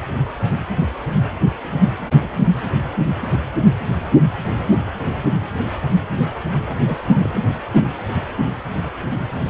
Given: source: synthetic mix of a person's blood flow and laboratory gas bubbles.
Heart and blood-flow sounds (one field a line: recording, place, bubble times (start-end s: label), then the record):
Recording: Doppler ultrasound of blood flow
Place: precordium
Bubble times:
1.64-1.73 s: bubbles
2.19-2.46 s: bubbles
6.66-6.79 s: bubbles
6.86-7.42 s: bubbles
From the record:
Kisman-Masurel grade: 221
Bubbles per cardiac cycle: several, 3 to 8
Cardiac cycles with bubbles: 10 to 50%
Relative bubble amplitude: barely perceptible (0.100 to 0.250)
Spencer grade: 2 (many but less than half of the cardiac periods contain bubble signals, singularly or in groups)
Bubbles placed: anywhere in the cardiac cycle